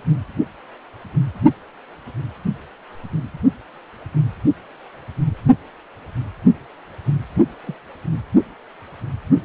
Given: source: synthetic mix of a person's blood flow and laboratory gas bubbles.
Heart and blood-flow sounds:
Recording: Doppler ultrasound of blood flow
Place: precordium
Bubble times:
7.64-7.75 s: bubbles
From the record:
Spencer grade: 1 (occasional bubble signal discernible with the cardiac motion signal, with majority of cardiac periods free of bubbles)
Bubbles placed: only in the low amplitude regions of the cardiac cycle

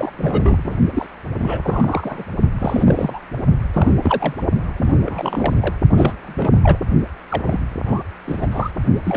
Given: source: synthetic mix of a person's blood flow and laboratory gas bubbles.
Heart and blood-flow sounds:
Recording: Doppler ultrasound of blood flow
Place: precordium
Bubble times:
0.00-0.11 s: bubbles
0.17-0.77 s: bubbles
0.91-1.07 s: bubbles
1.39-2.24 s: bubbles
2.58-3.19 s: bubbles
3.73-3.92 s: bubbles
4.02-4.34 s: bubbles
4.76-4.95 s: bubbles
5.05-5.55 s: bubbles
5.61-5.74 s: bubbles
5.89-6.13 s: bubbles
6.22-6.58 s: bubbles
6.63-6.78 s: bubbles
7.29-7.60 s: bubbles
7.85-8.03 s: bubbles
8.25-8.71 s: bubbles
9.03-9.17 s: bubbles
From the record:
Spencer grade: 3 (all of the cardiac periods contain showers or single bubble signals, but not dominating or overriding the cardiac motion signals)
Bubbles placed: only in the low amplitude regions of the cardiac cycle

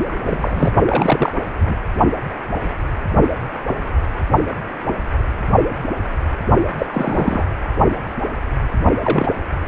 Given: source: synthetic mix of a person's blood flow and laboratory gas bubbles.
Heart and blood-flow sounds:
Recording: Doppler ultrasound of blood flow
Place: precordium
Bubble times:
0.00-0.12 s: bubbles
0.23-0.71 s: bubbles
0.77-1.32 s: bubbles
1.60-1.77 s: bubbles
6.77-7.44 s: bubbles
9.03-9.27 s: bubbles
From the record:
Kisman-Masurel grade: 222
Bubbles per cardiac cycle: several, 3 to 8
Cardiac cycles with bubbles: 10 to 50%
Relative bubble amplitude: moderate (0.250 to 0.450)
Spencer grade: 2 (many but less than half of the cardiac periods contain bubble signals, singularly or in groups)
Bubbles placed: anywhere in the cardiac cycle

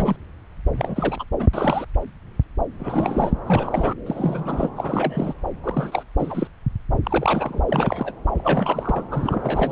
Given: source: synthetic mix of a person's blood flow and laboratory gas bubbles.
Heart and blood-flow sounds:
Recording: Doppler ultrasound of blood flow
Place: subclavian vein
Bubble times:
0.00-0.16 s: bubbles
0.75-1.25 s: bubbles
1.39-1.48 s: bubbles
1.53-1.85 s: bubbles
2.79-3.32 s: bubbles
3.46-3.94 s: bubbles
4.06-4.70 s: bubbles
4.76-5.34 s: bubbles
5.63-6.03 s: bubbles
6.19-6.48 s: bubbles
7.03-7.62 s: bubbles
7.68-8.12 s: bubbles
8.38-9.03 s: bubbles
9.11-9.72 s: bubbles
From the record:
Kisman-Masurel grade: 332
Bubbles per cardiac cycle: rolling drumbeat, 9 or more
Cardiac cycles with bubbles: 50 to 99%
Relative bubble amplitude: moderate (0.250 to 0.450)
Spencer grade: 3 (all of the cardiac periods contain showers or single bubble signals, but not dominating or overriding the cardiac motion signals)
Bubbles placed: anywhere in the cardiac cycle

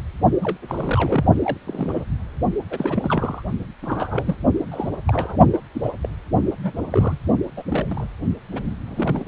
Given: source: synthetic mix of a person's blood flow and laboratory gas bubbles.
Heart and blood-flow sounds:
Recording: Doppler ultrasound of blood flow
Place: precordium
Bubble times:
0.41-0.58 s: bubbles
0.68-1.24 s: bubbles
1.43-1.57 s: bubbles
1.67-2.03 s: bubbles
2.70-3.43 s: bubbles
3.82-4.36 s: bubbles
4.71-4.90 s: bubbles
5.07-5.37 s: bubbles
5.53-5.59 s: bubbles
5.74-5.91 s: bubbles
6.03-6.08 s: bubbles
6.62-6.74 s: bubbles
6.90-7.19 s: bubbles
7.57-7.63 s: bubbles
7.70-8.07 s: bubbles
8.52-8.75 s: bubbles
8.88-9.28 s: bubbles
From the record:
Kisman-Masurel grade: 242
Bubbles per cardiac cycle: several, 3 to 8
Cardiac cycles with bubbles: 100%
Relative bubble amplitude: moderate (0.250 to 0.450)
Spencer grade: 3 (all of the cardiac periods contain showers or single bubble signals, but not dominating or overriding the cardiac motion signals)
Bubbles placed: only in the low amplitude regions of the cardiac cycle

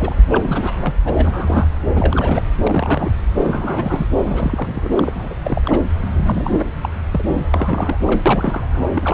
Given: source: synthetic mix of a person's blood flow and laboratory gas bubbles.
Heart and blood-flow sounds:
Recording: Doppler ultrasound of blood flow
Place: subclavian vein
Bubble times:
0.00-0.27 s: bubbles
0.30-0.94 s: bubbles
1.04-1.65 s: bubbles
1.95-2.43 s: bubbles
2.63-3.10 s: bubbles
3.41-4.06 s: bubbles
4.26-5.10 s: bubbles
5.15-5.34 s: bubbles
5.43-5.61 s: bubbles
5.65-5.79 s: bubbles
6.13-6.71 s: bubbles
6.81-6.89 s: bubbles
7.11-7.23 s: bubbles
7.27-7.97 s: bubbles
8.07-8.21 s: bubbles
8.25-8.84 s: bubbles
8.95-9.14 s: bubbles
From the record:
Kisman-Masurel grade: 332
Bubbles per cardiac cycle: rolling drumbeat, 9 or more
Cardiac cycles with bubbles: 50 to 99%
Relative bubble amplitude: moderate (0.250 to 0.450)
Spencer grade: 3 (all of the cardiac periods contain showers or single bubble signals, but not dominating or overriding the cardiac motion signals)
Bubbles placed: anywhere in the cardiac cycle

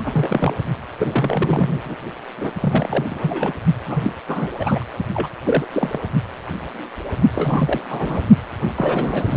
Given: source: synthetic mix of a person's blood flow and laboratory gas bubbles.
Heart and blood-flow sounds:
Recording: Doppler ultrasound of blood flow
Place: precordium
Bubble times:
0.00-0.54 s: bubbles
0.98-1.79 s: bubbles
1.84-1.96 s: bubbles
2.37-2.52 s: bubbles
2.60-3.07 s: bubbles
3.09-3.53 s: bubbles
3.86-4.12 s: bubbles
4.28-4.50 s: bubbles
4.59-4.85 s: bubbles
5.14-5.29 s: bubbles
5.45-5.64 s: bubbles
5.72-5.99 s: bubbles
7.33-7.83 s: bubbles
7.89-8.23 s: bubbles
8.76-9.37 s: bubbles
From the record:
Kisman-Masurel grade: 332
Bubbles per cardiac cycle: rolling drumbeat, 9 or more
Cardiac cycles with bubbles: 50 to 99%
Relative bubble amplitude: moderate (0.250 to 0.450)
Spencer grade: 3 (all of the cardiac periods contain showers or single bubble signals, but not dominating or overriding the cardiac motion signals)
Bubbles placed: only in the low amplitude regions of the cardiac cycle

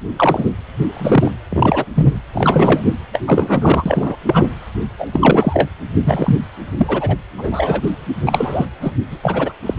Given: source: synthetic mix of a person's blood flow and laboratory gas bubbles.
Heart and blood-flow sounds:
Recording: Doppler ultrasound of blood flow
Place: precordium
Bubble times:
0.16-0.50 s: bubbles
0.93-1.32 s: bubbles
1.50-1.85 s: bubbles
1.94-2.21 s: bubbles
2.33-2.86 s: bubbles
3.12-3.20 s: bubbles
3.26-4.17 s: bubbles
4.25-4.48 s: bubbles
4.98-5.09 s: bubbles
5.12-5.70 s: bubbles
6.06-6.39 s: bubbles
6.78-7.16 s: bubbles
7.38-7.91 s: bubbles
8.26-8.66 s: bubbles
8.80-8.92 s: bubbles
9.11-9.18 s: bubbles
9.22-9.53 s: bubbles
9.66-9.74 s: bubbles
From the record:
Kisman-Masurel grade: 243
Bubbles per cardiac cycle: several, 3 to 8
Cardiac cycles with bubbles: 100%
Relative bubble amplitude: loud (0.450 to 0.775)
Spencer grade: 3 (all of the cardiac periods contain showers or single bubble signals, but not dominating or overriding the cardiac motion signals)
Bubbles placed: anywhere in the cardiac cycle

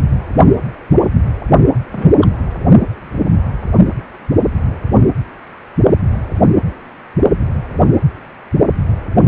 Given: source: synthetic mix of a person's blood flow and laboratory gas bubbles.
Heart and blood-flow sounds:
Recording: Doppler ultrasound of blood flow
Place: precordium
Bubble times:
1.92-2.10 s: bubbles
2.21-2.29 s: bubbles
From the record:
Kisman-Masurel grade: 112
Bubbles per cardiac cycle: 1 to 2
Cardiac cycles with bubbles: 1 to 10%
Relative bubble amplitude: moderate (0.250 to 0.450)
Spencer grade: 1 (occasional bubble signal discernible with the cardiac motion signal, with majority of cardiac periods free of bubbles)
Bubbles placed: only in the low amplitude regions of the cardiac cycle

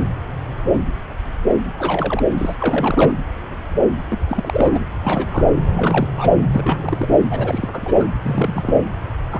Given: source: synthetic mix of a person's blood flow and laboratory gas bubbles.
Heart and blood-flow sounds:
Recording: Doppler ultrasound of blood flow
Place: subclavian vein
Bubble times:
1.77-2.23 s: bubbles
2.38-3.19 s: bubbles
4.10-4.18 s: bubbles
4.28-4.79 s: bubbles
5.03-5.27 s: bubbles
5.31-5.48 s: bubbles
5.74-6.07 s: bubbles
6.17-6.30 s: bubbles
6.53-7.15 s: bubbles
7.30-7.68 s: bubbles
7.72-8.05 s: bubbles
8.22-8.75 s: bubbles
9.30-9.40 s: bubbles
From the record:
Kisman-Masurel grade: 232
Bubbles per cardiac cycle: several, 3 to 8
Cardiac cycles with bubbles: 50 to 99%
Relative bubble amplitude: moderate (0.250 to 0.450)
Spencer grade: 3 (all of the cardiac periods contain showers or single bubble signals, but not dominating or overriding the cardiac motion signals)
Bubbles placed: anywhere in the cardiac cycle

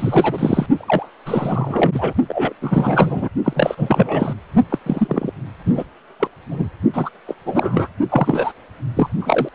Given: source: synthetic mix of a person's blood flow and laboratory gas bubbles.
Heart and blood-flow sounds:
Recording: Doppler ultrasound of blood flow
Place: precordium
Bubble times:
0.00-0.66 s: bubbles
0.74-1.09 s: bubbles
1.26-1.92 s: bubbles
1.94-2.13 s: bubbles
2.28-2.53 s: bubbles
2.61-3.28 s: bubbles
3.44-4.34 s: bubbles
4.69-4.78 s: bubbles
4.86-5.32 s: bubbles
5.67-5.84 s: bubbles
6.19-6.28 s: bubbles
6.51-6.69 s: bubbles
6.93-7.10 s: bubbles
7.27-7.35 s: bubbles
7.46-7.88 s: bubbles
8.10-8.53 s: bubbles
8.95-9.09 s: bubbles
9.19-9.50 s: bubbles
From the record:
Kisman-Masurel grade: 343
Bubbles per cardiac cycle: rolling drumbeat, 9 or more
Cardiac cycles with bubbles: 100%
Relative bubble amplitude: loud (0.450 to 0.775)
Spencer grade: 3 (all of the cardiac periods contain showers or single bubble signals, but not dominating or overriding the cardiac motion signals)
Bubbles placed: only in the low amplitude regions of the cardiac cycle

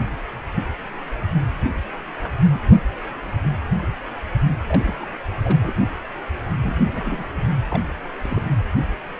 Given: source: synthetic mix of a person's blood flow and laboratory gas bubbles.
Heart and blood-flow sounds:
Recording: Doppler ultrasound of blood flow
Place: precordium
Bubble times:
2.22-2.30 s: bubbles
2.49-2.58 s: bubbles
4.67-5.07 s: bubbles
5.43-5.72 s: bubbles
6.62-7.27 s: bubbles
7.34-7.42 s: bubbles
7.69-7.83 s: bubbles
8.23-8.42 s: bubbles
From the record:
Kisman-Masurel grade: 221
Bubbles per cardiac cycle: several, 3 to 8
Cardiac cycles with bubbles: 10 to 50%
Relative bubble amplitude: barely perceptible (0.100 to 0.250)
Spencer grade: 2 (many but less than half of the cardiac periods contain bubble signals, singularly or in groups)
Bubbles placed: anywhere in the cardiac cycle

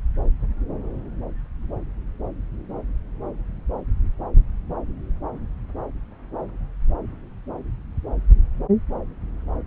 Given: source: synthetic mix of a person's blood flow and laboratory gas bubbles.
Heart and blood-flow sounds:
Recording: Doppler ultrasound of blood flow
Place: subclavian vein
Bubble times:
no bubbles
From the record:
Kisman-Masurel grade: 000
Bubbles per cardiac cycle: 0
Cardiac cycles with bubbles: 0%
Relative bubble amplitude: no bubbles discernible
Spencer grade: 0 (complete lack of bubble signals)

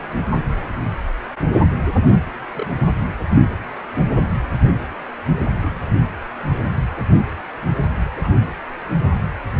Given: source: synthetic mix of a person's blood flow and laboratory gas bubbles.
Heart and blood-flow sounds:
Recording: Doppler ultrasound of blood flow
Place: precordium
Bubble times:
2.54-2.67 s: bubbles
4.21-4.27 s: bubbles
5.56-5.85 s: bubbles
8.17-8.31 s: bubbles
From the record:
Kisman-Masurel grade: 121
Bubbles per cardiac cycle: 1 to 2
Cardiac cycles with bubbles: 10 to 50%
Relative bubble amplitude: barely perceptible (0.100 to 0.250)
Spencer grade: 2 (many but less than half of the cardiac periods contain bubble signals, singularly or in groups)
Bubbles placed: anywhere in the cardiac cycle

